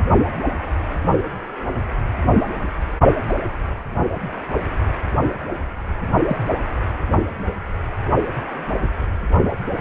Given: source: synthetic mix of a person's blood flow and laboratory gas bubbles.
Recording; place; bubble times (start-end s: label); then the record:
Doppler ultrasound of blood flow; precordium
3.29-3.35 s: bubbles
6.28-6.37 s: bubbles
From the record:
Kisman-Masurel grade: 122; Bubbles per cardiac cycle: 1 to 2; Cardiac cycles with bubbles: 10 to 50%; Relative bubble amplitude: moderate (0.250 to 0.450); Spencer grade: 2 (many but less than half of the cardiac periods contain bubble signals, singularly or in groups); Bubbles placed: only in the low amplitude regions of the cardiac cycle